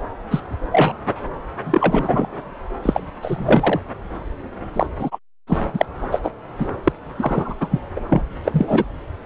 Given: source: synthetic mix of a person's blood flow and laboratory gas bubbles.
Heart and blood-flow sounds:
Doppler ultrasound of blood flow; subclavian vein
0.30-0.42 s: bubbles
0.72-0.93 s: bubbles
1.64-2.29 s: bubbles
2.83-3.00 s: bubbles
3.21-3.80 s: bubbles
4.73-4.86 s: bubbles
4.98-5.18 s: bubbles
5.47-5.59 s: bubbles
5.73-5.85 s: bubbles
6.12-6.19 s: bubbles
6.22-6.31 s: bubbles
6.58-6.69 s: bubbles
6.83-6.92 s: bubbles
7.18-7.55 s: bubbles
7.60-7.68 s: bubbles
7.71-7.80 s: bubbles
7.95-8.00 s: bubbles
8.10-8.22 s: bubbles
8.44-8.85 s: bubbles
From the record:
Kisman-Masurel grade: 243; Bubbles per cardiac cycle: several, 3 to 8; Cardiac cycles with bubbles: 100%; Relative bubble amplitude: loud (0.450 to 0.775); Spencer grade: 3 (all of the cardiac periods contain showers or single bubble signals, but not dominating or overriding the cardiac motion signals); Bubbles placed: anywhere in the cardiac cycle

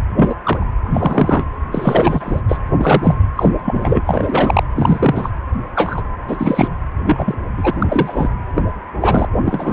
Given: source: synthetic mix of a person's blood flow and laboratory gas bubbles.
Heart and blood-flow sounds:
Doppler ultrasound of blood flow; precordium
0.16-0.35 s: bubbles
0.43-0.66 s: bubbles
0.93-1.45 s: bubbles
1.72-2.41 s: bubbles
2.48-2.59 s: bubbles
2.78-3.16 s: bubbles
3.36-3.49 s: bubbles
3.65-4.01 s: bubbles
4.06-4.63 s: bubbles
4.75-5.29 s: bubbles
5.75-6.02 s: bubbles
6.28-6.68 s: bubbles
7.04-7.36 s: bubbles
7.57-7.71 s: bubbles
7.79-8.30 s: bubbles
8.55-8.63 s: bubbles
9.01-9.27 s: bubbles
9.45-9.73 s: bubbles
From the record:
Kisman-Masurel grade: 233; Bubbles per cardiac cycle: several, 3 to 8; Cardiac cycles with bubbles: 50 to 99%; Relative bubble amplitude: loud (0.450 to 0.775); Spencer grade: 3 (all of the cardiac periods contain showers or single bubble signals, but not dominating or overriding the cardiac motion signals); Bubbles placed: anywhere in the cardiac cycle

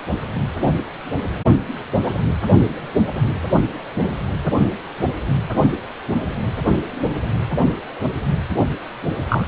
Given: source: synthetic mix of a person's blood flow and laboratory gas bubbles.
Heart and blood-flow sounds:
Doppler ultrasound of blood flow; precordium
9.29-9.47 s: bubbles
From the record:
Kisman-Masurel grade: 113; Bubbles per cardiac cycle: 1 to 2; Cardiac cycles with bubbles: 1 to 10%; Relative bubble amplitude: loud (0.450 to 0.775); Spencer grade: 1 (occasional bubble signal discernible with the cardiac motion signal, with majority of cardiac periods free of bubbles); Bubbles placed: only in the low amplitude regions of the cardiac cycle

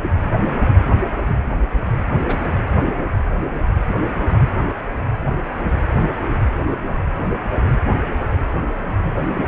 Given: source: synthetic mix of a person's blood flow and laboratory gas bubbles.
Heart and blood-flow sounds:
Doppler ultrasound of blood flow; precordium
2.27-2.37 s: bubbles
From the record:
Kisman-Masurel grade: 112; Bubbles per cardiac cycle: 1 to 2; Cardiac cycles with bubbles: 1 to 10%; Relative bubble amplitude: moderate (0.250 to 0.450); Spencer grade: 1 (occasional bubble signal discernible with the cardiac motion signal, with majority of cardiac periods free of bubbles); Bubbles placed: anywhere in the cardiac cycle

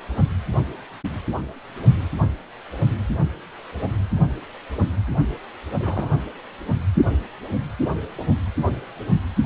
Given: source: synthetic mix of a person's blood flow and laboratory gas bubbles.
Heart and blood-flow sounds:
Doppler ultrasound of blood flow; precordium
5.72-5.76 s: bubbles
5.79-6.13 s: bubbles
From the record:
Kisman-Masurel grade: 211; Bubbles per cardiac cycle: several, 3 to 8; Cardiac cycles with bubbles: 1 to 10%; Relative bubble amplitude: barely perceptible (0.100 to 0.250); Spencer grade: 1 (occasional bubble signal discernible with the cardiac motion signal, with majority of cardiac periods free of bubbles); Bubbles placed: only in the low amplitude regions of the cardiac cycle

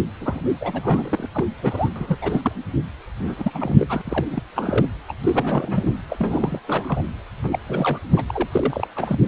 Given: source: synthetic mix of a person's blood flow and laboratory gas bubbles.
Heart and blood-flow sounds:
Doppler ultrasound of blood flow; precordium
0.00-0.02 s: bubbles
0.21-0.43 s: bubbles
0.60-1.29 s: bubbles
1.33-1.45 s: bubbles
1.62-1.89 s: bubbles
1.96-2.17 s: bubbles
2.21-2.52 s: bubbles
3.27-4.01 s: bubbles
4.05-4.25 s: bubbles
4.32-4.42 s: bubbles
4.55-4.88 s: bubbles
5.08-5.12 s: bubbles
5.23-5.93 s: bubbles
6.09-6.59 s: bubbles
6.67-7.01 s: bubbles
7.42-7.59 s: bubbles
7.67-7.99 s: bubbles
8.12-8.24 s: bubbles
8.29-8.47 s: bubbles
8.52-8.87 s: bubbles
8.96-9.26 s: bubbles
From the record:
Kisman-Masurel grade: 342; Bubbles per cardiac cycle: rolling drumbeat, 9 or more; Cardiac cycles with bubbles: 100%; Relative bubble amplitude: moderate (0.250 to 0.450); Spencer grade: 3 (all of the cardiac periods contain showers or single bubble signals, but not dominating or overriding the cardiac motion signals); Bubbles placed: anywhere in the cardiac cycle

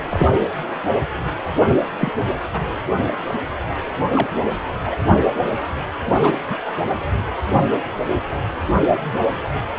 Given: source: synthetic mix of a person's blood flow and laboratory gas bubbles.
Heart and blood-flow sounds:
Doppler ultrasound of blood flow; precordium
0.09-0.28 s: bubbles
2.00-2.11 s: bubbles
4.14-4.28 s: bubbles
4.86-4.95 s: bubbles
6.23-6.35 s: bubbles
6.50-6.56 s: bubbles
From the record:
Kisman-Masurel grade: 122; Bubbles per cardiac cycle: 1 to 2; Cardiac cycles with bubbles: 10 to 50%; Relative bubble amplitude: moderate (0.250 to 0.450); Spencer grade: 2 (many but less than half of the cardiac periods contain bubble signals, singularly or in groups); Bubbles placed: anywhere in the cardiac cycle

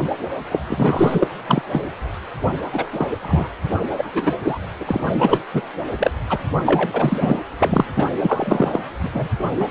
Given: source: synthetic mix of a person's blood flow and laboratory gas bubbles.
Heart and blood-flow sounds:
Doppler ultrasound of blood flow; precordium
0.00-0.10 s: bubbles
0.51-0.59 s: bubbles
0.67-1.28 s: bubbles
1.47-1.62 s: bubbles
1.72-1.88 s: bubbles
2.72-2.86 s: bubbles
2.92-3.10 s: bubbles
3.21-3.48 s: bubbles
3.98-4.32 s: bubbles
4.43-4.58 s: bubbles
4.80-5.41 s: bubbles
5.53-5.62 s: bubbles
5.99-6.11 s: bubbles
6.29-6.39 s: bubbles
6.66-7.37 s: bubbles
7.60-7.86 s: bubbles
7.96-8.06 s: bubbles
8.22-8.79 s: bubbles
9.03-9.10 s: bubbles
9.13-9.28 s: bubbles
9.56-9.69 s: bubbles
From the record:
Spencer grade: 3 (all of the cardiac periods contain showers or single bubble signals, but not dominating or overriding the cardiac motion signals); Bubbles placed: anywhere in the cardiac cycle

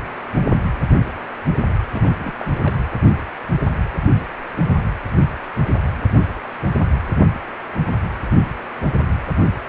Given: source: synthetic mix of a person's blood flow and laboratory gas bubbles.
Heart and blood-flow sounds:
Doppler ultrasound of blood flow; precordium
1.93-2.33 s: bubbles
2.36-2.45 s: bubbles
2.63-2.77 s: bubbles
From the record:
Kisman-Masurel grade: 221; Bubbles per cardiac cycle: several, 3 to 8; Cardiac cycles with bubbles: 10 to 50%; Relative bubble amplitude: barely perceptible (0.100 to 0.250); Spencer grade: 2 (many but less than half of the cardiac periods contain bubble signals, singularly or in groups); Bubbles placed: anywhere in the cardiac cycle

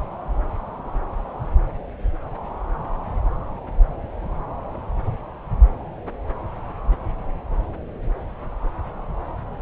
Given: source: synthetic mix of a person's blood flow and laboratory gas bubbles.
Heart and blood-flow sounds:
Doppler ultrasound of blood flow; subclavian vein
no bubbles
From the record:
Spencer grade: 0 (complete lack of bubble signals)

